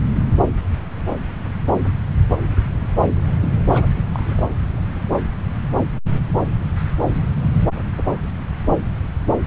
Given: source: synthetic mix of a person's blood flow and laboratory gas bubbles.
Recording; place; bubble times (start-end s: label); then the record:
Doppler ultrasound of blood flow; subclavian vein
3.42-3.53 s: bubbles
3.69-3.86 s: bubbles
4.12-4.43 s: bubbles
From the record:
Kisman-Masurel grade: 211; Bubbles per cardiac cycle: several, 3 to 8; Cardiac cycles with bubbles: 1 to 10%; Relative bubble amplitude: barely perceptible (0.100 to 0.250); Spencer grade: 1 (occasional bubble signal discernible with the cardiac motion signal, with majority of cardiac periods free of bubbles); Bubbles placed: anywhere in the cardiac cycle